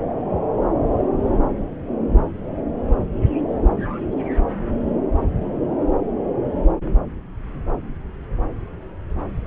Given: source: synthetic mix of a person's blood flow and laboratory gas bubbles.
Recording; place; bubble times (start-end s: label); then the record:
Doppler ultrasound of blood flow; subclavian vein
no bubbles
From the record:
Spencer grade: 0 (complete lack of bubble signals)